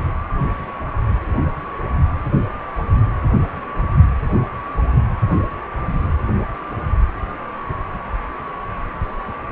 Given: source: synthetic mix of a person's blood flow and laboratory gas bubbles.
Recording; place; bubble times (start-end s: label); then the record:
Doppler ultrasound of blood flow; precordium
no bubbles
From the record:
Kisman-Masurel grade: 000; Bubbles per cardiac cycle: 0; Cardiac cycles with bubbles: 0%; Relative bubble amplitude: no bubbles discernible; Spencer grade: 0 (complete lack of bubble signals)